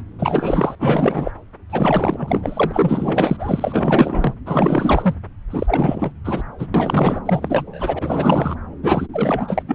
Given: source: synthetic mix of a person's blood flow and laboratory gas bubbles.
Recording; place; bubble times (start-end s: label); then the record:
Doppler ultrasound of blood flow; subclavian vein
0.18-0.75 s: bubbles
0.79-1.31 s: bubbles
1.70-4.34 s: bubbles
4.46-5.14 s: bubbles
5.50-6.11 s: bubbles
6.24-6.43 s: bubbles
6.58-6.67 s: bubbles
6.74-7.20 s: bubbles
7.25-8.55 s: bubbles
8.83-9.07 s: bubbles
9.13-9.62 s: bubbles
9.68-9.75 s: bubbles
From the record:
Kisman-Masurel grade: 444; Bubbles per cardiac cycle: continuous sound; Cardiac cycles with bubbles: 100%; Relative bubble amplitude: maximal (0.775 to 0.999); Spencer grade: 4 (maximum detectable bubble signal sounding continuously throughout systole and diastole of every cardiac period, and overriding the amplitude of the normal cardiac signals); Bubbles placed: anywhere in the cardiac cycle